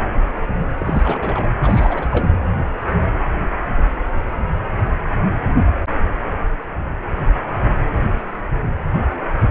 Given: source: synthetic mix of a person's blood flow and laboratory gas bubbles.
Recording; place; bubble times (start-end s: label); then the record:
Doppler ultrasound of blood flow; precordium
0.77-1.48 s: bubbles
1.62-2.27 s: bubbles
From the record:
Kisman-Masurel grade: 222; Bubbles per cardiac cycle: several, 3 to 8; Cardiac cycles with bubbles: 10 to 50%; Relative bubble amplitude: moderate (0.250 to 0.450); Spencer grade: 2 (many but less than half of the cardiac periods contain bubble signals, singularly or in groups); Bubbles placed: anywhere in the cardiac cycle